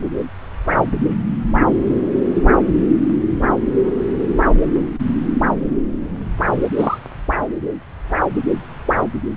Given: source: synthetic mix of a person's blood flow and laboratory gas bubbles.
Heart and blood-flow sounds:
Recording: Doppler ultrasound of blood flow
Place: subclavian vein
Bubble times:
6.77-6.98 s: bubbles
From the record:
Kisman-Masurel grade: 113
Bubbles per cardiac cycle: 1 to 2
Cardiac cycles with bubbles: 1 to 10%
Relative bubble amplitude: loud (0.450 to 0.775)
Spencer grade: 1 (occasional bubble signal discernible with the cardiac motion signal, with majority of cardiac periods free of bubbles)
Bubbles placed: anywhere in the cardiac cycle

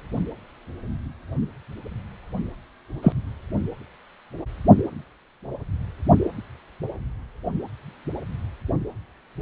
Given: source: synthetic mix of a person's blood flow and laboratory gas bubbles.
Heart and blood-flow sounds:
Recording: Doppler ultrasound of blood flow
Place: precordium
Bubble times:
3.02-3.12 s: bubbles
From the record:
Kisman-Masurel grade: 113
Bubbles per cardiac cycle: 1 to 2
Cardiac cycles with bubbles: 1 to 10%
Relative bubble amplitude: loud (0.450 to 0.775)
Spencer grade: 1 (occasional bubble signal discernible with the cardiac motion signal, with majority of cardiac periods free of bubbles)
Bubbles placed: only in the low amplitude regions of the cardiac cycle

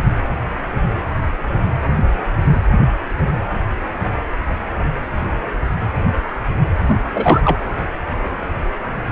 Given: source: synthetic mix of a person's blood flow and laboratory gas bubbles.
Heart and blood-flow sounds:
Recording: Doppler ultrasound of blood flow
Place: precordium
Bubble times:
6.88-6.96 s: bubbles
7.15-7.41 s: bubbles
7.44-7.58 s: bubbles
From the record:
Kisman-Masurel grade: 213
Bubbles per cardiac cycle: several, 3 to 8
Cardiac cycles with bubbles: 1 to 10%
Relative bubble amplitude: loud (0.450 to 0.775)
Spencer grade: 1 (occasional bubble signal discernible with the cardiac motion signal, with majority of cardiac periods free of bubbles)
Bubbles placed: anywhere in the cardiac cycle

